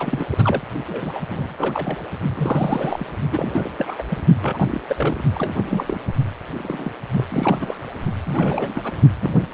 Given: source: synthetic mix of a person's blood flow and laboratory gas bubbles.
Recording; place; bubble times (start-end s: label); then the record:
Doppler ultrasound of blood flow; precordium
0.00-0.62 s: bubbles
0.86-1.23 s: bubbles
1.28-1.54 s: bubbles
1.58-1.99 s: bubbles
2.34-3.07 s: bubbles
3.32-3.71 s: bubbles
3.77-4.04 s: bubbles
4.10-4.17 s: bubbles
4.41-4.81 s: bubbles
4.88-5.23 s: bubbles
5.34-6.00 s: bubbles
6.58-6.92 s: bubbles
7.11-7.77 s: bubbles
8.24-8.93 s: bubbles
9.21-9.54 s: bubbles
From the record:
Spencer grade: 3 (all of the cardiac periods contain showers or single bubble signals, but not dominating or overriding the cardiac motion signals); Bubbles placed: only in the low amplitude regions of the cardiac cycle